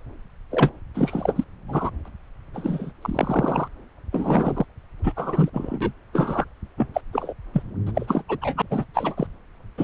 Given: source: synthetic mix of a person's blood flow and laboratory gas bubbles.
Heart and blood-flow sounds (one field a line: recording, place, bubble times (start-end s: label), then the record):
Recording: Doppler ultrasound of blood flow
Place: subclavian vein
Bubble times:
0.51-0.71 s: bubbles
0.94-1.44 s: bubbles
1.68-1.91 s: bubbles
2.05-2.08 s: bubbles
2.54-2.92 s: bubbles
3.02-3.68 s: bubbles
4.12-4.65 s: bubbles
5.04-5.12 s: bubbles
5.16-5.50 s: bubbles
5.53-5.92 s: bubbles
6.13-6.45 s: bubbles
6.78-6.87 s: bubbles
6.94-7.01 s: bubbles
7.12-7.33 s: bubbles
7.54-7.62 s: bubbles
7.86-7.92 s: bubbles
7.94-8.23 s: bubbles
8.28-8.38 s: bubbles
8.41-8.54 s: bubbles
8.57-8.62 s: bubbles
8.71-8.85 s: bubbles
8.94-9.27 s: bubbles
9.77-9.84 s: bubbles
From the record:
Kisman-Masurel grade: 242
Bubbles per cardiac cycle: several, 3 to 8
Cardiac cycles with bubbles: 100%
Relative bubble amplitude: moderate (0.250 to 0.450)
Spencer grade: 3 (all of the cardiac periods contain showers or single bubble signals, but not dominating or overriding the cardiac motion signals)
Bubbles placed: anywhere in the cardiac cycle